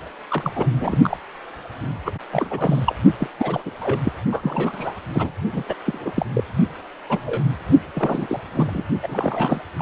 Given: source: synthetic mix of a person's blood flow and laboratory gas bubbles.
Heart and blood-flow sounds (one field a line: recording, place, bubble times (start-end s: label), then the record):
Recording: Doppler ultrasound of blood flow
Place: precordium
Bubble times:
0.28-0.52 s: bubbles
0.56-0.67 s: bubbles
0.81-1.17 s: bubbles
2.05-2.11 s: bubbles
2.32-2.95 s: bubbles
3.19-3.27 s: bubbles
3.38-3.62 s: bubbles
3.65-3.71 s: bubbles
3.80-4.01 s: bubbles
4.04-4.13 s: bubbles
4.32-5.01 s: bubbles
5.12-5.32 s: bubbles
5.52-5.63 s: bubbles
5.69-5.76 s: bubbles
5.86-6.12 s: bubbles
6.16-6.26 s: bubbles
6.34-6.44 s: bubbles
7.10-7.43 s: bubbles
7.94-8.41 s: bubbles
8.55-8.84 s: bubbles
9.03-9.61 s: bubbles
9.79-9.82 s: bubbles
From the record:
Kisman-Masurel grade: 342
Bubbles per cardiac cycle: rolling drumbeat, 9 or more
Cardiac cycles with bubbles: 100%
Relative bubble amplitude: moderate (0.250 to 0.450)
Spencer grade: 3 (all of the cardiac periods contain showers or single bubble signals, but not dominating or overriding the cardiac motion signals)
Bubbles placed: only in the low amplitude regions of the cardiac cycle